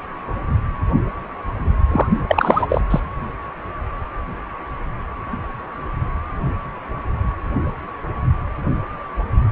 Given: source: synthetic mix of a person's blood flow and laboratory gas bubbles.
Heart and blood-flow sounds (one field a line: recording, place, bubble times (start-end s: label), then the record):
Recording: Doppler ultrasound of blood flow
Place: precordium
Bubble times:
1.91-2.08 s: bubbles
2.28-2.81 s: bubbles
2.90-3.00 s: bubbles
From the record:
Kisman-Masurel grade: 213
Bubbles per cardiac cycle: several, 3 to 8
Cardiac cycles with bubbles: 1 to 10%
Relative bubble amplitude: loud (0.450 to 0.775)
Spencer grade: 1 (occasional bubble signal discernible with the cardiac motion signal, with majority of cardiac periods free of bubbles)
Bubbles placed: anywhere in the cardiac cycle